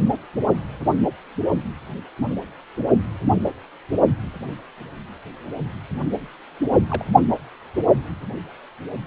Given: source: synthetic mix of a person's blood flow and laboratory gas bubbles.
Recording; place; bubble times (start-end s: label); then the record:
Doppler ultrasound of blood flow; precordium
6.90-7.04 s: bubbles
From the record:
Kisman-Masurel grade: 121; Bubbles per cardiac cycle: 1 to 2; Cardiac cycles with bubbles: 10 to 50%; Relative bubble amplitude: barely perceptible (0.100 to 0.250); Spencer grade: 2 (many but less than half of the cardiac periods contain bubble signals, singularly or in groups); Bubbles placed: only in the low amplitude regions of the cardiac cycle